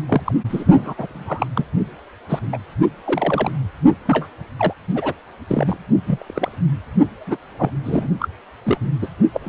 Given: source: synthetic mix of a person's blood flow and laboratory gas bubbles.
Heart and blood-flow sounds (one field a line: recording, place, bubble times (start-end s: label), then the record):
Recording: Doppler ultrasound of blood flow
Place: precordium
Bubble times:
0.08-0.21 s: bubbles
0.26-0.32 s: bubbles
0.49-0.64 s: bubbles
0.74-0.94 s: bubbles
0.97-1.47 s: bubbles
1.53-1.66 s: bubbles
2.29-2.40 s: bubbles
2.52-2.58 s: bubbles
3.05-3.50 s: bubbles
4.05-4.26 s: bubbles
4.58-4.73 s: bubbles
4.94-5.13 s: bubbles
5.47-5.76 s: bubbles
6.06-6.58 s: bubbles
7.27-7.36 s: bubbles
7.58-7.71 s: bubbles
7.84-8.08 s: bubbles
8.20-8.28 s: bubbles
8.65-8.78 s: bubbles
9.02-9.08 s: bubbles
9.33-9.49 s: bubbles
From the record:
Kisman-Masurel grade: 242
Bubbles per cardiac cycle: several, 3 to 8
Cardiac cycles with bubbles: 100%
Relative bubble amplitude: moderate (0.250 to 0.450)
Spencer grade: 3 (all of the cardiac periods contain showers or single bubble signals, but not dominating or overriding the cardiac motion signals)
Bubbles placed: only in the low amplitude regions of the cardiac cycle